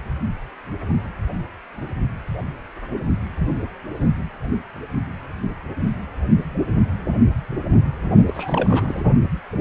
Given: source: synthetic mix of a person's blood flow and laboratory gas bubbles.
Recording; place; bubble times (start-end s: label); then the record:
Doppler ultrasound of blood flow; precordium
8.26-9.03 s: bubbles
From the record:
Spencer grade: 1 (occasional bubble signal discernible with the cardiac motion signal, with majority of cardiac periods free of bubbles); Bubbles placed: only in the low amplitude regions of the cardiac cycle